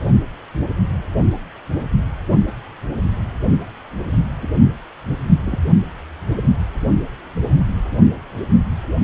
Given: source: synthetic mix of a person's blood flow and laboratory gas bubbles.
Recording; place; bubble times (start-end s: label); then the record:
Doppler ultrasound of blood flow; precordium
4.42-4.47 s: bubbles
5.45-5.58 s: bubbles
From the record:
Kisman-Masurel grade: 122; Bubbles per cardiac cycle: 1 to 2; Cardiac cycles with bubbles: 10 to 50%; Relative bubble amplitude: moderate (0.250 to 0.450); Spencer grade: 2 (many but less than half of the cardiac periods contain bubble signals, singularly or in groups); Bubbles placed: only in the low amplitude regions of the cardiac cycle